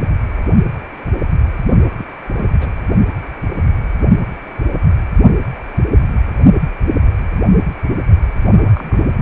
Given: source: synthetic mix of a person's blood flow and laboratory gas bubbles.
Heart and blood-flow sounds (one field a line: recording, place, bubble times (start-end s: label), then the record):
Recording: Doppler ultrasound of blood flow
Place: precordium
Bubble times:
1.98-2.04 s: bubbles
2.37-2.47 s: bubbles
2.59-2.67 s: bubbles
8.52-9.09 s: bubbles
From the record:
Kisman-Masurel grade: 221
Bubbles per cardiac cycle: several, 3 to 8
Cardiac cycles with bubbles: 10 to 50%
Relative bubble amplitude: barely perceptible (0.100 to 0.250)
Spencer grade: 2 (many but less than half of the cardiac periods contain bubble signals, singularly or in groups)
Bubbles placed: only in the low amplitude regions of the cardiac cycle